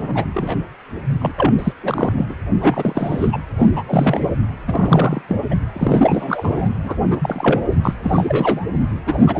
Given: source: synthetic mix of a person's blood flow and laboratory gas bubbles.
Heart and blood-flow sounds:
Doppler ultrasound of blood flow; precordium
0.01-0.25 s: bubbles
0.33-0.58 s: bubbles
1.21-1.31 s: bubbles
1.38-1.73 s: bubbles
1.82-2.12 s: bubbles
2.17-2.36 s: bubbles
2.60-3.39 s: bubbles
3.59-3.83 s: bubbles
3.88-4.38 s: bubbles
4.67-5.22 s: bubbles
5.29-5.36 s: bubbles
5.50-5.55 s: bubbles
5.75-6.70 s: bubbles
6.83-6.95 s: bubbles
7.10-7.18 s: bubbles
7.22-7.62 s: bubbles
7.71-7.75 s: bubbles
7.81-7.94 s: bubbles
8.03-8.65 s: bubbles
9.06-9.40 s: bubbles
From the record:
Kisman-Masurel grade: 343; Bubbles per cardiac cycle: rolling drumbeat, 9 or more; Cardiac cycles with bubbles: 100%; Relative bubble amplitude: loud (0.450 to 0.775); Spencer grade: 3 (all of the cardiac periods contain showers or single bubble signals, but not dominating or overriding the cardiac motion signals); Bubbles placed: anywhere in the cardiac cycle

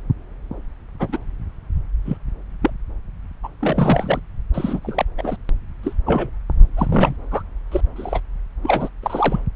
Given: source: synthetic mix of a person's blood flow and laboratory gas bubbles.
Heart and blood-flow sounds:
Doppler ultrasound of blood flow; subclavian vein
1.00-1.19 s: bubbles
2.05-2.17 s: bubbles
2.62-2.71 s: bubbles
3.43-3.48 s: bubbles
3.61-4.19 s: bubbles
4.54-4.79 s: bubbles
4.82-5.04 s: bubbles
5.17-5.37 s: bubbles
5.83-5.93 s: bubbles
6.06-6.30 s: bubbles
6.76-7.16 s: bubbles
7.31-7.42 s: bubbles
7.71-7.81 s: bubbles
7.96-8.20 s: bubbles
8.63-8.89 s: bubbles
9.03-9.40 s: bubbles
From the record:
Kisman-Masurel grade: 232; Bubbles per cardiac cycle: several, 3 to 8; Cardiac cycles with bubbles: 50 to 99%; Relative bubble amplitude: moderate (0.250 to 0.450); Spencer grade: 3 (all of the cardiac periods contain showers or single bubble signals, but not dominating or overriding the cardiac motion signals); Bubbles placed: anywhere in the cardiac cycle

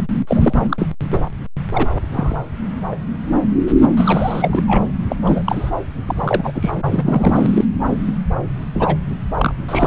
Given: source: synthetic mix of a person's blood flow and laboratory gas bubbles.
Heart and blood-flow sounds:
Doppler ultrasound of blood flow; subclavian vein
0.00-0.03 s: bubbles
0.27-0.53 s: bubbles
0.65-0.87 s: bubbles
1.12-1.19 s: bubbles
1.73-1.90 s: bubbles
2.13-2.37 s: bubbles
2.91-2.96 s: bubbles
3.97-4.62 s: bubbles
4.67-4.83 s: bubbles
5.09-5.16 s: bubbles
5.25-5.43 s: bubbles
5.46-5.71 s: bubbles
6.06-6.71 s: bubbles
6.89-7.65 s: bubbles
8.73-8.96 s: bubbles
9.38-9.53 s: bubbles
9.68-9.87 s: bubbles
From the record:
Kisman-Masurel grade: 232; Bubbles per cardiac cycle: several, 3 to 8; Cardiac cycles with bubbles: 50 to 99%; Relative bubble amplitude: moderate (0.250 to 0.450); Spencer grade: 3 (all of the cardiac periods contain showers or single bubble signals, but not dominating or overriding the cardiac motion signals); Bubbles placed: anywhere in the cardiac cycle

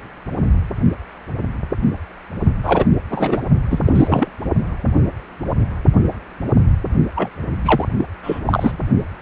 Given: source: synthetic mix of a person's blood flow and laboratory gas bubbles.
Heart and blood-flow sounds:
Doppler ultrasound of blood flow; precordium
2.63-2.85 s: bubbles
3.10-3.42 s: bubbles
3.70-3.80 s: bubbles
3.85-4.33 s: bubbles
7.15-7.30 s: bubbles
7.64-7.88 s: bubbles
7.98-8.05 s: bubbles
8.23-8.39 s: bubbles
8.46-8.76 s: bubbles
From the record:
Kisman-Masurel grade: 333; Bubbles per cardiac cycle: rolling drumbeat, 9 or more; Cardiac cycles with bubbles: 50 to 99%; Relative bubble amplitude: loud (0.450 to 0.775); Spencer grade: 3 (all of the cardiac periods contain showers or single bubble signals, but not dominating or overriding the cardiac motion signals); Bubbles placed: only in the low amplitude regions of the cardiac cycle

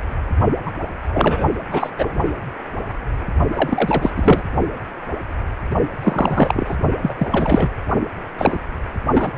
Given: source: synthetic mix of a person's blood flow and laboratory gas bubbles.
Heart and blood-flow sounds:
Doppler ultrasound of blood flow; precordium
0.65-0.71 s: bubbles
1.08-1.47 s: bubbles
1.70-1.90 s: bubbles
1.98-2.05 s: bubbles
3.55-4.12 s: bubbles
4.16-4.42 s: bubbles
6.03-6.78 s: bubbles
7.02-7.14 s: bubbles
7.18-7.28 s: bubbles
7.32-7.69 s: bubbles
8.38-8.60 s: bubbles
9.14-9.31 s: bubbles
From the record:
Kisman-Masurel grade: 333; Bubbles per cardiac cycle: rolling drumbeat, 9 or more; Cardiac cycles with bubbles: 50 to 99%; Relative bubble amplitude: loud (0.450 to 0.775); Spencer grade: 3 (all of the cardiac periods contain showers or single bubble signals, but not dominating or overriding the cardiac motion signals); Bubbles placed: only in the low amplitude regions of the cardiac cycle

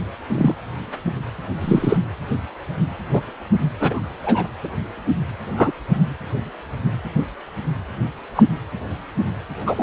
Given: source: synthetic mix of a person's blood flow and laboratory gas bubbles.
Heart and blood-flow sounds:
Doppler ultrasound of blood flow; precordium
0.32-0.55 s: bubbles
1.60-1.97 s: bubbles
3.13-3.21 s: bubbles
3.79-4.08 s: bubbles
4.23-4.48 s: bubbles
4.64-4.69 s: bubbles
5.57-5.71 s: bubbles
8.35-8.43 s: bubbles
9.66-9.83 s: bubbles
From the record:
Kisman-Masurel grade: 123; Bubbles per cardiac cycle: 1 to 2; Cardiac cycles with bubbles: 10 to 50%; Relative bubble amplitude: loud (0.450 to 0.775); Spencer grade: 2 (many but less than half of the cardiac periods contain bubble signals, singularly or in groups); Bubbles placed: anywhere in the cardiac cycle

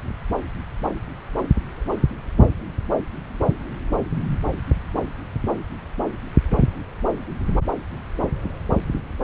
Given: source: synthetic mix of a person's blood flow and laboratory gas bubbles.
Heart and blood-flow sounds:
Doppler ultrasound of blood flow; subclavian vein
no bubbles
From the record:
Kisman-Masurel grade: 000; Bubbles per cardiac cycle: 0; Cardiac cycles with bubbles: 0%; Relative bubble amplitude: no bubbles discernible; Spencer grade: 0 (complete lack of bubble signals)

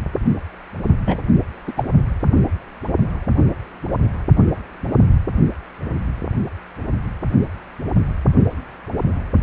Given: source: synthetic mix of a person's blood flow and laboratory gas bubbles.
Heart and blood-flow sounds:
Doppler ultrasound of blood flow; precordium
1.06-1.18 s: bubbles
1.67-1.72 s: bubbles
1.76-1.83 s: bubbles
From the record:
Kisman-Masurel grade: 213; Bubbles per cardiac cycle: several, 3 to 8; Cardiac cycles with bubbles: 1 to 10%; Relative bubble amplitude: loud (0.450 to 0.775); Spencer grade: 1 (occasional bubble signal discernible with the cardiac motion signal, with majority of cardiac periods free of bubbles); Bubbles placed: only in the low amplitude regions of the cardiac cycle

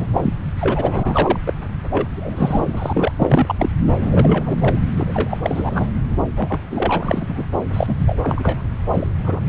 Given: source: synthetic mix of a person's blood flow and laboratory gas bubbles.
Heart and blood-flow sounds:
Doppler ultrasound of blood flow; subclavian vein
0.00-0.07 s: bubbles
0.14-0.33 s: bubbles
0.60-1.40 s: bubbles
1.46-1.53 s: bubbles
1.89-2.08 s: bubbles
2.16-3.12 s: bubbles
3.17-3.55 s: bubbles
3.58-3.70 s: bubbles
4.00-4.79 s: bubbles
4.96-5.38 s: bubbles
5.43-5.91 s: bubbles
6.36-6.60 s: bubbles
6.70-7.46 s: bubbles
7.73-7.96 s: bubbles
8.00-8.17 s: bubbles
8.23-8.62 s: bubbles
8.94-9.07 s: bubbles
9.23-9.40 s: bubbles
From the record:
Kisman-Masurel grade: 343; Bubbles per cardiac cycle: rolling drumbeat, 9 or more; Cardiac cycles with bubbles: 100%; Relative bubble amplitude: loud (0.450 to 0.775); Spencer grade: 3 (all of the cardiac periods contain showers or single bubble signals, but not dominating or overriding the cardiac motion signals); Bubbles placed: anywhere in the cardiac cycle

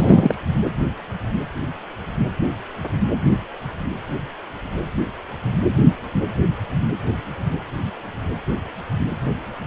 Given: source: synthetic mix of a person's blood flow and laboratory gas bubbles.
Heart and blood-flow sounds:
Doppler ultrasound of blood flow; precordium
0.00-0.35 s: bubbles
From the record:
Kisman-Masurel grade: 213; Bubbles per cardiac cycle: several, 3 to 8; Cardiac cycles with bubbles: 1 to 10%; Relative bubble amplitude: loud (0.450 to 0.775); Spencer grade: 1 (occasional bubble signal discernible with the cardiac motion signal, with majority of cardiac periods free of bubbles); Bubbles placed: anywhere in the cardiac cycle

